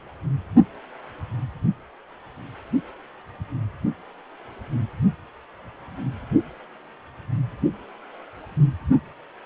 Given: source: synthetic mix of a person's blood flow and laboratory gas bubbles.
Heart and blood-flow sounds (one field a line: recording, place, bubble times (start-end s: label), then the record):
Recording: Doppler ultrasound of blood flow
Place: precordium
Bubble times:
no bubbles
From the record:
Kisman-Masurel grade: 000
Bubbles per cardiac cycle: 0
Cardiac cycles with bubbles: 0%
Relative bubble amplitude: no bubbles discernible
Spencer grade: 0 (complete lack of bubble signals)